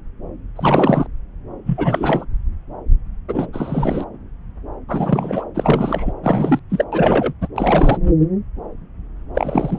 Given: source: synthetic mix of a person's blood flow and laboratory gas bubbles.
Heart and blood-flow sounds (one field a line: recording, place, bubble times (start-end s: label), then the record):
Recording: Doppler ultrasound of blood flow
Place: subclavian vein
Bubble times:
0.55-1.07 s: bubbles
1.65-2.25 s: bubbles
3.28-3.50 s: bubbles
3.52-4.05 s: bubbles
4.88-5.45 s: bubbles
5.54-6.12 s: bubbles
6.23-6.59 s: bubbles
6.70-6.84 s: bubbles
6.92-7.33 s: bubbles
7.41-7.47 s: bubbles
7.56-7.98 s: bubbles
9.35-9.79 s: bubbles
From the record:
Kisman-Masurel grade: 333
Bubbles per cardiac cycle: rolling drumbeat, 9 or more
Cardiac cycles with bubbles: 50 to 99%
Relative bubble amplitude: loud (0.450 to 0.775)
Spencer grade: 3 (all of the cardiac periods contain showers or single bubble signals, but not dominating or overriding the cardiac motion signals)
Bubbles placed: anywhere in the cardiac cycle